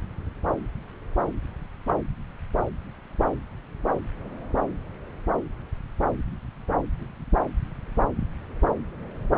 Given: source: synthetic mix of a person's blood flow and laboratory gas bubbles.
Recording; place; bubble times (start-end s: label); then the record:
Doppler ultrasound of blood flow; subclavian vein
1.87-1.94 s: bubbles
From the record:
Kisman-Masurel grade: 122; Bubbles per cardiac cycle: 1 to 2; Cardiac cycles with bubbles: 10 to 50%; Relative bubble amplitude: moderate (0.250 to 0.450); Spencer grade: 2 (many but less than half of the cardiac periods contain bubble signals, singularly or in groups); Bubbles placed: anywhere in the cardiac cycle